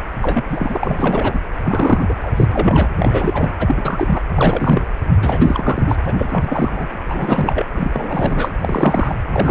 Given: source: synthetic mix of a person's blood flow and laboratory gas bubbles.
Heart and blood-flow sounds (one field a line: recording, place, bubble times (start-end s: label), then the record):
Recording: Doppler ultrasound of blood flow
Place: precordium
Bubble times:
0.22-1.41 s: bubbles
1.63-2.04 s: bubbles
2.08-2.14 s: bubbles
2.23-2.32 s: bubbles
2.36-2.48 s: bubbles
2.51-2.89 s: bubbles
2.98-3.53 s: bubbles
3.59-4.23 s: bubbles
4.35-4.83 s: bubbles
5.17-5.96 s: bubbles
6.05-6.13 s: bubbles
6.18-6.87 s: bubbles
6.92-7.66 s: bubbles
7.73-8.51 s: bubbles
8.60-9.15 s: bubbles
9.32-9.51 s: bubbles
From the record:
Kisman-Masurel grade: 343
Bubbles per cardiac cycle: rolling drumbeat, 9 or more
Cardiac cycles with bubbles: 100%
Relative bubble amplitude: loud (0.450 to 0.775)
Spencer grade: 3 (all of the cardiac periods contain showers or single bubble signals, but not dominating or overriding the cardiac motion signals)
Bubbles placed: anywhere in the cardiac cycle